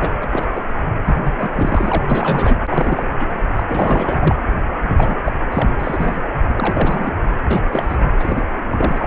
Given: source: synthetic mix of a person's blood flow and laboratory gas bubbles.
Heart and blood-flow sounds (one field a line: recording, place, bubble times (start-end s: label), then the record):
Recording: Doppler ultrasound of blood flow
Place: precordium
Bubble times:
0.00-0.10 s: bubbles
0.21-0.50 s: bubbles
0.55-0.60 s: bubbles
1.05-1.16 s: bubbles
1.22-2.07 s: bubbles
2.10-2.58 s: bubbles
2.67-3.03 s: bubbles
3.19-3.27 s: bubbles
3.55-3.63 s: bubbles
3.67-4.42 s: bubbles
4.83-5.16 s: bubbles
5.26-5.37 s: bubbles
5.51-5.73 s: bubbles
5.79-6.24 s: bubbles
6.49-6.54 s: bubbles
6.57-7.15 s: bubbles
7.50-7.60 s: bubbles
7.69-7.87 s: bubbles
7.90-7.97 s: bubbles
8.19-8.43 s: bubbles
8.67-9.07 s: bubbles
From the record:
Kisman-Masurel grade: 342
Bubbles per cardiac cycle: rolling drumbeat, 9 or more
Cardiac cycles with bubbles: 100%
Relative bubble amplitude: moderate (0.250 to 0.450)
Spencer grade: 3 (all of the cardiac periods contain showers or single bubble signals, but not dominating or overriding the cardiac motion signals)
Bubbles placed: anywhere in the cardiac cycle